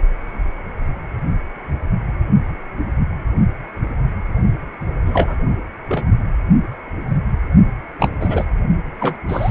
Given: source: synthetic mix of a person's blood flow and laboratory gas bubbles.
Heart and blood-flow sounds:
Doppler ultrasound of blood flow; precordium
5.05-5.38 s: bubbles
5.88-6.04 s: bubbles
7.99-8.10 s: bubbles
8.20-8.44 s: bubbles
9.00-9.16 s: bubbles
9.28-9.51 s: bubbles
From the record:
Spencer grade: 2 (many but less than half of the cardiac periods contain bubble signals, singularly or in groups); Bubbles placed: only in the low amplitude regions of the cardiac cycle

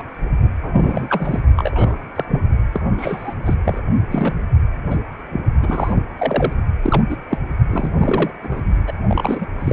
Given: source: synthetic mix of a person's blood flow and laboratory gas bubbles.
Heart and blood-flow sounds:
Doppler ultrasound of blood flow; precordium
0.00-0.02 s: bubbles
0.62-1.40 s: bubbles
1.56-1.95 s: bubbles
2.15-2.25 s: bubbles
2.28-2.40 s: bubbles
2.74-2.81 s: bubbles
2.98-3.33 s: bubbles
3.45-3.55 s: bubbles
3.65-3.83 s: bubbles
4.10-4.33 s: bubbles
4.90-4.96 s: bubbles
5.30-5.42 s: bubbles
5.61-6.03 s: bubbles
6.17-6.52 s: bubbles
6.82-7.02 s: bubbles
7.08-7.17 s: bubbles
7.30-7.38 s: bubbles
7.69-8.31 s: bubbles
8.43-8.65 s: bubbles
8.87-8.93 s: bubbles
9.07-9.46 s: bubbles
9.59-9.73 s: bubbles
From the record:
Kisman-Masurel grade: 242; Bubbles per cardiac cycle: several, 3 to 8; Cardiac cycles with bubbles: 100%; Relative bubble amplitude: moderate (0.250 to 0.450); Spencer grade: 3 (all of the cardiac periods contain showers or single bubble signals, but not dominating or overriding the cardiac motion signals); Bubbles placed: only in the low amplitude regions of the cardiac cycle

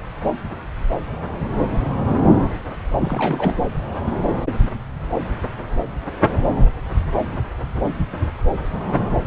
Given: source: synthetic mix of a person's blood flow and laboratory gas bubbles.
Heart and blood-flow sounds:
Doppler ultrasound of blood flow; subclavian vein
2.99-3.59 s: bubbles
From the record:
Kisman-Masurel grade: 211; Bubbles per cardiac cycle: several, 3 to 8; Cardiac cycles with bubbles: 1 to 10%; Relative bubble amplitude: barely perceptible (0.100 to 0.250); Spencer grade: 1 (occasional bubble signal discernible with the cardiac motion signal, with majority of cardiac periods free of bubbles); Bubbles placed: anywhere in the cardiac cycle

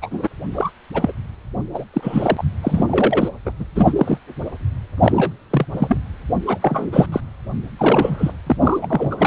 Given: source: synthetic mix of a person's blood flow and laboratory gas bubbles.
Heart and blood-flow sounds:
Doppler ultrasound of blood flow; precordium
0.02-0.27 s: bubbles
0.53-0.71 s: bubbles
0.94-1.12 s: bubbles
1.73-1.84 s: bubbles
1.94-2.43 s: bubbles
2.62-2.85 s: bubbles
2.88-3.29 s: bubbles
3.45-3.52 s: bubbles
3.59-3.65 s: bubbles
3.75-4.18 s: bubbles
5.02-5.34 s: bubbles
5.50-5.65 s: bubbles
5.72-5.97 s: bubbles
6.46-6.58 s: bubbles
6.61-7.06 s: bubbles
7.12-7.20 s: bubbles
7.77-8.33 s: bubbles
8.46-8.56 s: bubbles
8.62-9.15 s: bubbles
9.18-9.27 s: bubbles
From the record:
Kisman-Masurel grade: 243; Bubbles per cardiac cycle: several, 3 to 8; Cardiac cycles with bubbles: 100%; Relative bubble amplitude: loud (0.450 to 0.775); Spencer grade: 3 (all of the cardiac periods contain showers or single bubble signals, but not dominating or overriding the cardiac motion signals); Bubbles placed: anywhere in the cardiac cycle

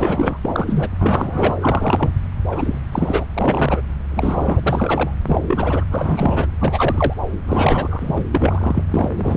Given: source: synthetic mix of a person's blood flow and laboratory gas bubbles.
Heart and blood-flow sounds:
Doppler ultrasound of blood flow; subclavian vein
0.00-0.38 s: bubbles
0.43-0.89 s: bubbles
0.98-1.56 s: bubbles
1.60-2.10 s: bubbles
2.51-2.79 s: bubbles
2.92-3.25 s: bubbles
3.34-3.81 s: bubbles
4.12-4.60 s: bubbles
4.63-5.11 s: bubbles
5.26-5.84 s: bubbles
5.92-6.47 s: bubbles
6.60-7.14 s: bubbles
7.48-8.24 s: bubbles
8.32-8.84 s: bubbles
8.90-9.09 s: bubbles
9.18-9.36 s: bubbles
From the record:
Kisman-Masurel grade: 332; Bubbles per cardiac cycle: rolling drumbeat, 9 or more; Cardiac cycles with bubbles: 50 to 99%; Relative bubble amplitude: moderate (0.250 to 0.450); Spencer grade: 3 (all of the cardiac periods contain showers or single bubble signals, but not dominating or overriding the cardiac motion signals); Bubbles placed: anywhere in the cardiac cycle

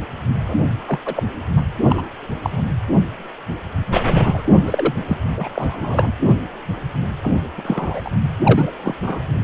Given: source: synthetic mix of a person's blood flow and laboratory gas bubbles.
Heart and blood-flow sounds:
Doppler ultrasound of blood flow; precordium
0.45-0.64 s: bubbles
0.88-0.99 s: bubbles
1.05-1.46 s: bubbles
1.56-1.60 s: bubbles
1.89-2.03 s: bubbles
2.42-2.61 s: bubbles
3.94-4.44 s: bubbles
4.67-4.94 s: bubbles
5.08-5.19 s: bubbles
5.36-6.11 s: bubbles
7.22-7.31 s: bubbles
7.56-8.10 s: bubbles
8.43-8.71 s: bubbles
8.83-8.95 s: bubbles
9.02-9.21 s: bubbles
From the record:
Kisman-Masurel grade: 232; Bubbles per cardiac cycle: several, 3 to 8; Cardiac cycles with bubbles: 50 to 99%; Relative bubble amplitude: moderate (0.250 to 0.450); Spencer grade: 3 (all of the cardiac periods contain showers or single bubble signals, but not dominating or overriding the cardiac motion signals); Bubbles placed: anywhere in the cardiac cycle

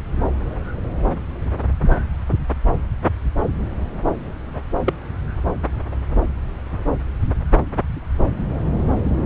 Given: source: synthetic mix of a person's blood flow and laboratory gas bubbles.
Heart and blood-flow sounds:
Doppler ultrasound of blood flow; subclavian vein
4.85-4.94 s: bubbles
From the record:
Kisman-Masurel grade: 112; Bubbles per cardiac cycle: 1 to 2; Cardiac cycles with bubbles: 1 to 10%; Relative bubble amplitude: moderate (0.250 to 0.450); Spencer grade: 1 (occasional bubble signal discernible with the cardiac motion signal, with majority of cardiac periods free of bubbles); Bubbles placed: anywhere in the cardiac cycle

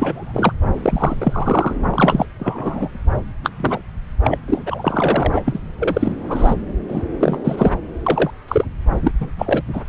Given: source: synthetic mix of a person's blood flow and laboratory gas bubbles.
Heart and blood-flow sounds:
Doppler ultrasound of blood flow; subclavian vein
0.00-0.53 s: bubbles
0.74-1.17 s: bubbles
1.20-1.76 s: bubbles
1.90-2.26 s: bubbles
2.39-2.90 s: bubbles
3.44-3.50 s: bubbles
3.60-3.81 s: bubbles
4.24-4.38 s: bubbles
4.47-4.62 s: bubbles
4.66-5.42 s: bubbles
5.44-5.59 s: bubbles
5.79-6.54 s: bubbles
6.88-7.05 s: bubbles
7.19-7.37 s: bubbles
7.44-7.71 s: bubbles
8.06-8.30 s: bubbles
8.48-8.65 s: bubbles
9.04-9.12 s: bubbles
9.21-9.30 s: bubbles
9.38-9.62 s: bubbles
9.73-9.81 s: bubbles
From the record:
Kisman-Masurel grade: 243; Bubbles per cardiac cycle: several, 3 to 8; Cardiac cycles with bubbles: 100%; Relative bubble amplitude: loud (0.450 to 0.775); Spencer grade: 3 (all of the cardiac periods contain showers or single bubble signals, but not dominating or overriding the cardiac motion signals); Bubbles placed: anywhere in the cardiac cycle

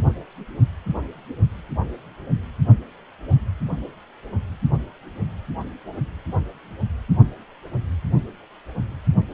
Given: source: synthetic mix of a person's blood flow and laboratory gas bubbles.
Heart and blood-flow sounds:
Doppler ultrasound of blood flow; precordium
no bubbles
From the record:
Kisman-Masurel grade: 000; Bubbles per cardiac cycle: 0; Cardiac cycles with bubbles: 0%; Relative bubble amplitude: no bubbles discernible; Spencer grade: 0 (complete lack of bubble signals)

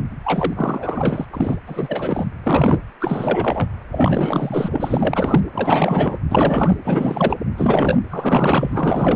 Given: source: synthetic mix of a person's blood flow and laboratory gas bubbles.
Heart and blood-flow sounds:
Doppler ultrasound of blood flow; precordium
0.24-1.25 s: bubbles
1.32-1.56 s: bubbles
1.66-2.25 s: bubbles
2.46-2.80 s: bubbles
3.00-3.68 s: bubbles
3.91-5.41 s: bubbles
5.53-6.20 s: bubbles
6.30-6.77 s: bubbles
6.84-7.37 s: bubbles
7.57-8.01 s: bubbles
8.10-9.16 s: bubbles
From the record:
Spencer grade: 4 (maximum detectable bubble signal sounding continuously throughout systole and diastole of every cardiac period, and overriding the amplitude of the normal cardiac signals); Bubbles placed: anywhere in the cardiac cycle

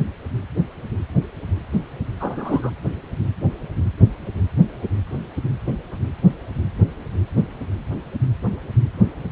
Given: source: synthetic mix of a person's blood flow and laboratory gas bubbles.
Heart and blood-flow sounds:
Doppler ultrasound of blood flow; precordium
2.20-2.70 s: bubbles
From the record:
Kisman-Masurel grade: 112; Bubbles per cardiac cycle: 1 to 2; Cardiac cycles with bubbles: 1 to 10%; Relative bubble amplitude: moderate (0.250 to 0.450); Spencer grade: 1 (occasional bubble signal discernible with the cardiac motion signal, with majority of cardiac periods free of bubbles); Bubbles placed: anywhere in the cardiac cycle

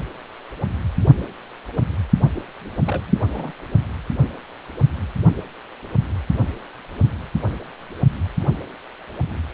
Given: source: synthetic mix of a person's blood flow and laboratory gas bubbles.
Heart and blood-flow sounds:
Doppler ultrasound of blood flow; precordium
2.35-2.40 s: bubbles
2.86-3.01 s: bubbles
3.06-3.20 s: bubbles
3.32-3.52 s: bubbles
From the record:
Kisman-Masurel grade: 211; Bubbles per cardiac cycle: several, 3 to 8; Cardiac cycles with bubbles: 1 to 10%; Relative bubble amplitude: barely perceptible (0.100 to 0.250); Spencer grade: 1 (occasional bubble signal discernible with the cardiac motion signal, with majority of cardiac periods free of bubbles); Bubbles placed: only in the low amplitude regions of the cardiac cycle

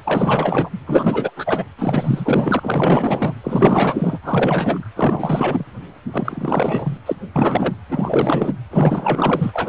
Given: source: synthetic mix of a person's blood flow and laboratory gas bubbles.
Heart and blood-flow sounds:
Doppler ultrasound of blood flow; precordium
0.05-0.70 s: bubbles
0.86-1.31 s: bubbles
1.36-1.65 s: bubbles
1.78-3.34 s: bubbles
3.44-4.20 s: bubbles
4.23-4.90 s: bubbles
4.96-5.65 s: bubbles
6.11-6.97 s: bubbles
7.06-7.16 s: bubbles
7.36-7.75 s: bubbles
7.88-8.54 s: bubbles
8.71-9.69 s: bubbles
From the record:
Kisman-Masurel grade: 444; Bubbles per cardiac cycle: continuous sound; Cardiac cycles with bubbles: 100%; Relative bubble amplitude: maximal (0.775 to 0.999); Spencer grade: 4 (maximum detectable bubble signal sounding continuously throughout systole and diastole of every cardiac period, and overriding the amplitude of the normal cardiac signals); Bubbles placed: anywhere in the cardiac cycle

